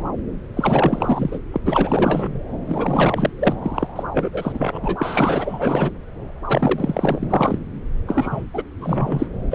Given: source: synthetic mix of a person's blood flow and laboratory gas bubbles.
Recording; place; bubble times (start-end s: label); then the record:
Doppler ultrasound of blood flow; subclavian vein
0.56-1.39 s: bubbles
1.53-1.60 s: bubbles
1.65-2.41 s: bubbles
2.65-3.33 s: bubbles
3.39-3.55 s: bubbles
3.62-3.88 s: bubbles
3.96-4.03 s: bubbles
4.12-5.91 s: bubbles
6.48-7.28 s: bubbles
7.30-7.59 s: bubbles
8.07-8.44 s: bubbles
8.53-8.63 s: bubbles
8.80-9.29 s: bubbles
9.50-9.55 s: bubbles
From the record:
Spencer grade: 4 (maximum detectable bubble signal sounding continuously throughout systole and diastole of every cardiac period, and overriding the amplitude of the normal cardiac signals); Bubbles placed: anywhere in the cardiac cycle